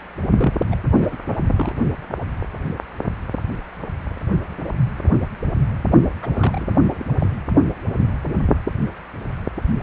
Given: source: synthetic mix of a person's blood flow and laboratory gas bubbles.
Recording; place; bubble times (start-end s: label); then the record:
Doppler ultrasound of blood flow; precordium
0.00-0.02 s: bubbles
0.38-0.60 s: bubbles
0.70-0.77 s: bubbles
0.97-1.17 s: bubbles
1.56-1.72 s: bubbles
6.22-6.28 s: bubbles
6.33-6.79 s: bubbles
6.90-7.04 s: bubbles
7.21-7.26 s: bubbles
From the record:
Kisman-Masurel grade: 221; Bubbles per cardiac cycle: several, 3 to 8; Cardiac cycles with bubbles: 10 to 50%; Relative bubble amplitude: barely perceptible (0.100 to 0.250); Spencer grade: 2 (many but less than half of the cardiac periods contain bubble signals, singularly or in groups); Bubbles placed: only in the low amplitude regions of the cardiac cycle